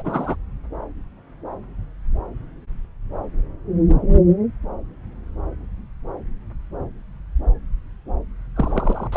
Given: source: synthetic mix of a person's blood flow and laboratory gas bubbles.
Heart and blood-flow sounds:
Doppler ultrasound of blood flow; subclavian vein
0.00-0.36 s: bubbles
8.56-9.07 s: bubbles
9.12-9.17 s: bubbles
From the record:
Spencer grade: 2 (many but less than half of the cardiac periods contain bubble signals, singularly or in groups); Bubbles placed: anywhere in the cardiac cycle

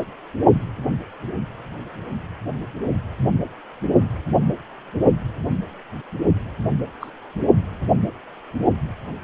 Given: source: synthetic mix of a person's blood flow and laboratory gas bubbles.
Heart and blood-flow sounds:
Doppler ultrasound of blood flow; precordium
7.00-7.10 s: bubbles
From the record:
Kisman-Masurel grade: 121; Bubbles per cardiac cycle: 1 to 2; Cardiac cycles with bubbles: 10 to 50%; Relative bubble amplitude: barely perceptible (0.100 to 0.250); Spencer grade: 2 (many but less than half of the cardiac periods contain bubble signals, singularly or in groups); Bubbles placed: only in the low amplitude regions of the cardiac cycle

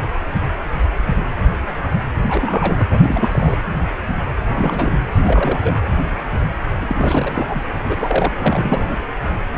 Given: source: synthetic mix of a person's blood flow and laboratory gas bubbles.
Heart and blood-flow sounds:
Doppler ultrasound of blood flow; precordium
2.27-2.85 s: bubbles
2.89-3.56 s: bubbles
4.46-4.93 s: bubbles
5.15-5.76 s: bubbles
6.81-7.63 s: bubbles
7.85-8.32 s: bubbles
8.39-8.97 s: bubbles
From the record:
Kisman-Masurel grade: 332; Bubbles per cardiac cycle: rolling drumbeat, 9 or more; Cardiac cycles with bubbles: 50 to 99%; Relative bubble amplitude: moderate (0.250 to 0.450); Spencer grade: 3 (all of the cardiac periods contain showers or single bubble signals, but not dominating or overriding the cardiac motion signals); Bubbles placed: anywhere in the cardiac cycle

